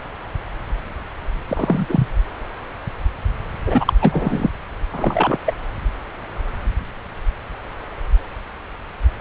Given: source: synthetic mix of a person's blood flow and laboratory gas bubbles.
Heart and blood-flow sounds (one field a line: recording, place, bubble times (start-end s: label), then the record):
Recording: Doppler ultrasound of blood flow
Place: subclavian vein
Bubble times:
1.48-1.87 s: bubbles
1.89-2.08 s: bubbles
3.66-3.93 s: bubbles
4.01-4.50 s: bubbles
4.92-5.38 s: bubbles
5.46-5.53 s: bubbles
From the record:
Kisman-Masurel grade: 223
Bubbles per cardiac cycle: several, 3 to 8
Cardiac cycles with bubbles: 10 to 50%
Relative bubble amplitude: loud (0.450 to 0.775)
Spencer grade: 2 (many but less than half of the cardiac periods contain bubble signals, singularly or in groups)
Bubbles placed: anywhere in the cardiac cycle